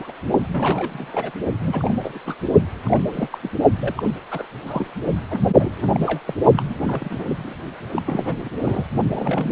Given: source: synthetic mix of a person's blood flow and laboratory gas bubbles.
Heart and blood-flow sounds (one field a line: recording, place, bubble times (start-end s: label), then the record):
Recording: Doppler ultrasound of blood flow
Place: precordium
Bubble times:
0.00-0.12 s: bubbles
0.52-1.31 s: bubbles
1.60-1.94 s: bubbles
2.02-2.19 s: bubbles
2.25-2.35 s: bubbles
2.84-3.28 s: bubbles
3.32-3.38 s: bubbles
3.42-3.50 s: bubbles
3.80-4.11 s: bubbles
4.30-4.47 s: bubbles
4.66-4.91 s: bubbles
5.29-5.41 s: bubbles
5.52-5.90 s: bubbles
5.94-6.21 s: bubbles
6.26-6.34 s: bubbles
6.57-6.62 s: bubbles
6.69-6.75 s: bubbles
6.79-7.25 s: bubbles
7.28-7.54 s: bubbles
7.92-8.02 s: bubbles
8.06-8.49 s: bubbles
8.62-8.86 s: bubbles
9.12-9.52 s: bubbles
From the record:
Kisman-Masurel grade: 342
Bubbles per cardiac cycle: rolling drumbeat, 9 or more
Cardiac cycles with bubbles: 100%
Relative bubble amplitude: moderate (0.250 to 0.450)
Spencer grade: 3 (all of the cardiac periods contain showers or single bubble signals, but not dominating or overriding the cardiac motion signals)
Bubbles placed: only in the low amplitude regions of the cardiac cycle